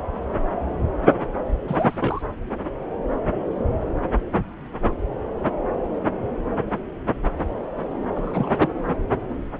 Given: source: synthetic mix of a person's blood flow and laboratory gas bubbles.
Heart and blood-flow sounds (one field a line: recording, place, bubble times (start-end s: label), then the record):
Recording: Doppler ultrasound of blood flow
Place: subclavian vein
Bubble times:
1.68-2.22 s: bubbles
8.14-8.70 s: bubbles
From the record:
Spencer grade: 2 (many but less than half of the cardiac periods contain bubble signals, singularly or in groups)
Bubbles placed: anywhere in the cardiac cycle